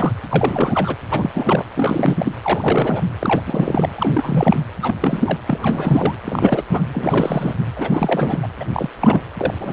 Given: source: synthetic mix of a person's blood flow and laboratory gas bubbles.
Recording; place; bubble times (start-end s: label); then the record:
Doppler ultrasound of blood flow; precordium
0.00-0.13 s: bubbles
0.29-0.95 s: bubbles
1.10-1.70 s: bubbles
1.76-2.32 s: bubbles
2.41-3.04 s: bubbles
3.19-3.41 s: bubbles
3.46-3.89 s: bubbles
3.95-4.60 s: bubbles
4.82-4.95 s: bubbles
5.00-5.21 s: bubbles
5.24-5.38 s: bubbles
5.46-6.15 s: bubbles
6.24-6.63 s: bubbles
6.69-6.83 s: bubbles
6.94-7.54 s: bubbles
7.77-8.38 s: bubbles
8.42-8.47 s: bubbles
8.60-8.64 s: bubbles
8.72-8.90 s: bubbles
9.00-9.21 s: bubbles
9.38-9.53 s: bubbles
9.61-9.73 s: bubbles
From the record:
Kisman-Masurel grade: 342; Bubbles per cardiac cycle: rolling drumbeat, 9 or more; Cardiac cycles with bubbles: 100%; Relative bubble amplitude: moderate (0.250 to 0.450); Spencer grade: 3 (all of the cardiac periods contain showers or single bubble signals, but not dominating or overriding the cardiac motion signals); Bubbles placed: anywhere in the cardiac cycle